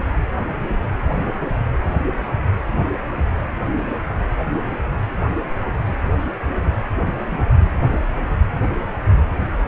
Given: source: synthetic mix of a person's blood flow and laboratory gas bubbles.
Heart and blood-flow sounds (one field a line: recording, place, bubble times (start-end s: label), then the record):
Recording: Doppler ultrasound of blood flow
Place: precordium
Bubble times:
2.06-2.37 s: bubbles
7.30-7.51 s: bubbles
7.88-7.99 s: bubbles
From the record:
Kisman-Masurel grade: 121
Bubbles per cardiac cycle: 1 to 2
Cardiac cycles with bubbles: 10 to 50%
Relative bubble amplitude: barely perceptible (0.100 to 0.250)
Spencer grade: 2 (many but less than half of the cardiac periods contain bubble signals, singularly or in groups)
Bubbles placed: anywhere in the cardiac cycle